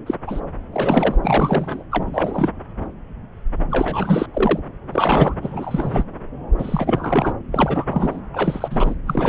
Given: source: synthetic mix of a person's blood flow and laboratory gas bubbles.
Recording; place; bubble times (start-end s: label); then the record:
Doppler ultrasound of blood flow; subclavian vein
0.06-0.14 s: bubbles
0.27-0.40 s: bubbles
0.72-1.17 s: bubbles
1.23-1.84 s: bubbles
1.91-2.51 s: bubbles
3.70-4.26 s: bubbles
4.33-4.60 s: bubbles
4.92-5.34 s: bubbles
5.42-6.04 s: bubbles
6.58-7.34 s: bubbles
7.51-8.21 s: bubbles
8.33-8.95 s: bubbles
9.07-9.29 s: bubbles
From the record:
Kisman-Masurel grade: 333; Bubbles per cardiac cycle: rolling drumbeat, 9 or more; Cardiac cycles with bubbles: 50 to 99%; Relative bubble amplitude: loud (0.450 to 0.775); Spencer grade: 3 (all of the cardiac periods contain showers or single bubble signals, but not dominating or overriding the cardiac motion signals); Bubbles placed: anywhere in the cardiac cycle